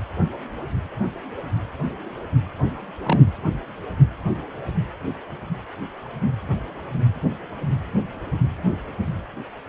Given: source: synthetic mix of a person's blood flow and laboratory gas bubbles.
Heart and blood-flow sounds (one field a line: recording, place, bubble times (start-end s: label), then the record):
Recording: Doppler ultrasound of blood flow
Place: precordium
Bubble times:
3.03-3.20 s: bubbles
From the record:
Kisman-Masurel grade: 112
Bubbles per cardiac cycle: 1 to 2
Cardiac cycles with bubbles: 1 to 10%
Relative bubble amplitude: moderate (0.250 to 0.450)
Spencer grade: 1 (occasional bubble signal discernible with the cardiac motion signal, with majority of cardiac periods free of bubbles)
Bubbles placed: anywhere in the cardiac cycle